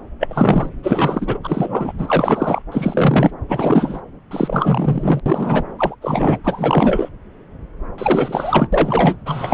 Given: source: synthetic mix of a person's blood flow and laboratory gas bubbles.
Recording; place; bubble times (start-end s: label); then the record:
Doppler ultrasound of blood flow; subclavian vein
0.19-0.69 s: bubbles
0.83-1.38 s: bubbles
1.44-1.93 s: bubbles
1.98-2.62 s: bubbles
2.72-3.31 s: bubbles
3.48-4.01 s: bubbles
4.31-5.21 s: bubbles
5.25-5.62 s: bubbles
5.78-5.96 s: bubbles
6.01-6.38 s: bubbles
6.44-7.09 s: bubbles
7.98-8.68 s: bubbles
8.72-9.17 s: bubbles
9.26-9.54 s: bubbles
From the record:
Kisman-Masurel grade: 333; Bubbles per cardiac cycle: rolling drumbeat, 9 or more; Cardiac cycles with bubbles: 50 to 99%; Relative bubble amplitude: loud (0.450 to 0.775); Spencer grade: 3 (all of the cardiac periods contain showers or single bubble signals, but not dominating or overriding the cardiac motion signals); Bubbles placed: anywhere in the cardiac cycle